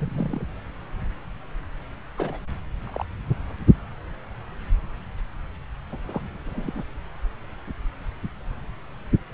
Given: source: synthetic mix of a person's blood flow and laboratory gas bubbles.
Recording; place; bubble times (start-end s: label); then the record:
Doppler ultrasound of blood flow; subclavian vein
0.00-0.42 s: bubbles
2.17-2.40 s: bubbles
2.86-3.05 s: bubbles
5.92-5.97 s: bubbles
6.06-6.21 s: bubbles
6.45-6.83 s: bubbles
From the record:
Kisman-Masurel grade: 221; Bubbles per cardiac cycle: several, 3 to 8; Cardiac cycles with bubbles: 10 to 50%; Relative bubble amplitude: barely perceptible (0.100 to 0.250); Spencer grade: 2 (many but less than half of the cardiac periods contain bubble signals, singularly or in groups); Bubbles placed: anywhere in the cardiac cycle